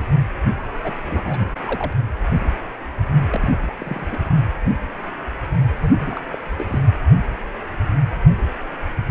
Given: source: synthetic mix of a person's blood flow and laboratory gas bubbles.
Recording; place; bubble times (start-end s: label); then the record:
Doppler ultrasound of blood flow; precordium
0.84-0.95 s: bubbles
1.06-1.54 s: bubbles
1.65-1.93 s: bubbles
3.32-3.73 s: bubbles
3.76-4.18 s: bubbles
5.80-6.21 s: bubbles
6.33-6.37 s: bubbles
6.57-6.79 s: bubbles
From the record:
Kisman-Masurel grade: 221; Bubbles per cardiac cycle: several, 3 to 8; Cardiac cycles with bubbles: 10 to 50%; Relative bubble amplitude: barely perceptible (0.100 to 0.250); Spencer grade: 2 (many but less than half of the cardiac periods contain bubble signals, singularly or in groups); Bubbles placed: only in the low amplitude regions of the cardiac cycle